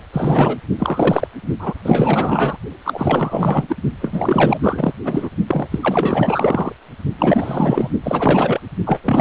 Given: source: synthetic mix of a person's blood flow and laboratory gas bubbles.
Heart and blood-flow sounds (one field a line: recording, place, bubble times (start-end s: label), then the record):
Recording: Doppler ultrasound of blood flow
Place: precordium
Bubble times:
0.12-0.58 s: bubbles
0.78-1.27 s: bubbles
1.59-1.73 s: bubbles
1.83-2.57 s: bubbles
2.84-3.76 s: bubbles
4.01-4.58 s: bubbles
4.62-4.92 s: bubbles
5.04-5.30 s: bubbles
5.47-5.68 s: bubbles
5.71-5.79 s: bubbles
5.82-6.73 s: bubbles
7.18-7.89 s: bubbles
8.03-8.60 s: bubbles
8.85-9.21 s: bubbles
From the record:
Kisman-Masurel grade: 444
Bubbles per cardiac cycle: continuous sound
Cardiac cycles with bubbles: 100%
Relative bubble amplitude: maximal (0.775 to 0.999)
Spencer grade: 4 (maximum detectable bubble signal sounding continuously throughout systole and diastole of every cardiac period, and overriding the amplitude of the normal cardiac signals)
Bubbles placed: only in the low amplitude regions of the cardiac cycle